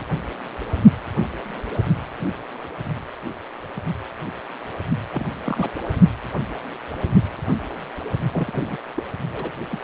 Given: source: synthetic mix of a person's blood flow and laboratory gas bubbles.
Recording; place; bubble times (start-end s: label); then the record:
Doppler ultrasound of blood flow; precordium
5.12-5.29 s: bubbles
5.44-5.71 s: bubbles
8.32-8.78 s: bubbles
8.97-9.03 s: bubbles
9.34-9.51 s: bubbles
9.70-9.82 s: bubbles
From the record:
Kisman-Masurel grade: 221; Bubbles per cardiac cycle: several, 3 to 8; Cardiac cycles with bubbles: 10 to 50%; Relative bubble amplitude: barely perceptible (0.100 to 0.250); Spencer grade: 2 (many but less than half of the cardiac periods contain bubble signals, singularly or in groups); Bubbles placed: only in the low amplitude regions of the cardiac cycle